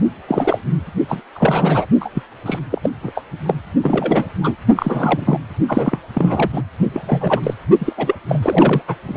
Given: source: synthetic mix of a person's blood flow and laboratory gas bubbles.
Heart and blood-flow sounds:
Doppler ultrasound of blood flow; precordium
0.28-0.60 s: bubbles
1.08-1.21 s: bubbles
1.34-1.85 s: bubbles
2.00-2.09 s: bubbles
2.15-2.23 s: bubbles
2.46-2.59 s: bubbles
2.70-2.79 s: bubbles
2.83-2.90 s: bubbles
3.02-3.12 s: bubbles
3.15-3.23 s: bubbles
3.46-3.54 s: bubbles
3.82-4.29 s: bubbles
4.42-4.55 s: bubbles
4.75-5.38 s: bubbles
5.68-5.98 s: bubbles
6.13-6.62 s: bubbles
6.93-7.41 s: bubbles
7.43-7.54 s: bubbles
7.79-7.93 s: bubbles
7.97-8.15 s: bubbles
8.29-8.82 s: bubbles
8.88-8.95 s: bubbles
9.07-9.17 s: bubbles
From the record:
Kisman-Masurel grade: 342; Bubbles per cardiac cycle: rolling drumbeat, 9 or more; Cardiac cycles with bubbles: 100%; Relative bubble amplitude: moderate (0.250 to 0.450); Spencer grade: 3 (all of the cardiac periods contain showers or single bubble signals, but not dominating or overriding the cardiac motion signals); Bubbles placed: only in the low amplitude regions of the cardiac cycle

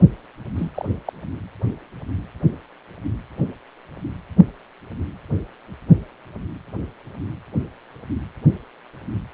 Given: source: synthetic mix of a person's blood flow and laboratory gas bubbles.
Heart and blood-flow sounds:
Doppler ultrasound of blood flow; precordium
0.56-0.71 s: bubbles
0.74-0.85 s: bubbles
1.05-1.12 s: bubbles
From the record:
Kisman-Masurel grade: 221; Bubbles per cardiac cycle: several, 3 to 8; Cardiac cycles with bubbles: 10 to 50%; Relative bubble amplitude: barely perceptible (0.100 to 0.250); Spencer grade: 2 (many but less than half of the cardiac periods contain bubble signals, singularly or in groups); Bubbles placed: only in the low amplitude regions of the cardiac cycle

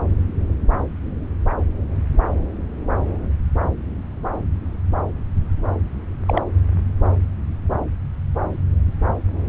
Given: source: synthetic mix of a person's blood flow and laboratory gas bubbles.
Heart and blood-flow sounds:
Doppler ultrasound of blood flow; subclavian vein
6.26-6.42 s: bubbles
From the record:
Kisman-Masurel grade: 112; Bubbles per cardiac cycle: 1 to 2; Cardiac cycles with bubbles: 1 to 10%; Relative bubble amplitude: moderate (0.250 to 0.450); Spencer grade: 1 (occasional bubble signal discernible with the cardiac motion signal, with majority of cardiac periods free of bubbles); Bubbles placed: anywhere in the cardiac cycle

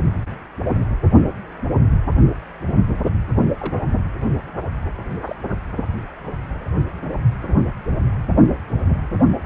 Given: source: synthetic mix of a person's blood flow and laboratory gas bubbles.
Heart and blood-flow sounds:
Doppler ultrasound of blood flow; precordium
0.90-0.96 s: bubbles
3.59-3.78 s: bubbles
5.24-5.36 s: bubbles
5.51-5.54 s: bubbles
From the record:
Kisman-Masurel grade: 121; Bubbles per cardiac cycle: 1 to 2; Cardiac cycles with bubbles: 10 to 50%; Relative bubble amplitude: barely perceptible (0.100 to 0.250); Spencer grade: 2 (many but less than half of the cardiac periods contain bubble signals, singularly or in groups); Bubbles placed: only in the low amplitude regions of the cardiac cycle

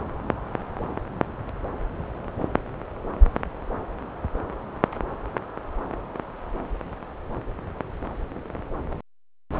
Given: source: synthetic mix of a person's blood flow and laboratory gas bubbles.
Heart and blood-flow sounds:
Doppler ultrasound of blood flow; subclavian vein
no bubbles
From the record:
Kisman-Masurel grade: 000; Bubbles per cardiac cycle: 0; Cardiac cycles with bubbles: 0%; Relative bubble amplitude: no bubbles discernible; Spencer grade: 0 (complete lack of bubble signals)

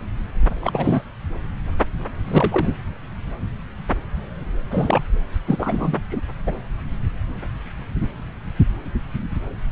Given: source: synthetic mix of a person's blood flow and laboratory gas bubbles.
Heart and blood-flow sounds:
Doppler ultrasound of blood flow; subclavian vein
0.54-1.02 s: bubbles
2.25-2.72 s: bubbles
4.71-5.03 s: bubbles
5.46-6.02 s: bubbles
6.09-6.20 s: bubbles
6.46-6.56 s: bubbles
From the record:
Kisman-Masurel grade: 222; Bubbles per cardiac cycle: several, 3 to 8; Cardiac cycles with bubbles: 10 to 50%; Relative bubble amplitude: moderate (0.250 to 0.450); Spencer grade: 2 (many but less than half of the cardiac periods contain bubble signals, singularly or in groups); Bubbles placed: anywhere in the cardiac cycle

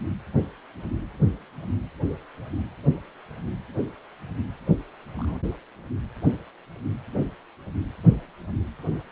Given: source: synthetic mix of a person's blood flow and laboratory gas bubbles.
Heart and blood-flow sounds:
Doppler ultrasound of blood flow; precordium
5.17-5.39 s: bubbles
From the record:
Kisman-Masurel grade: 111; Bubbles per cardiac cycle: 1 to 2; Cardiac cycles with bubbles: 1 to 10%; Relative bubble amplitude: barely perceptible (0.100 to 0.250); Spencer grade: 1 (occasional bubble signal discernible with the cardiac motion signal, with majority of cardiac periods free of bubbles); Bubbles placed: anywhere in the cardiac cycle

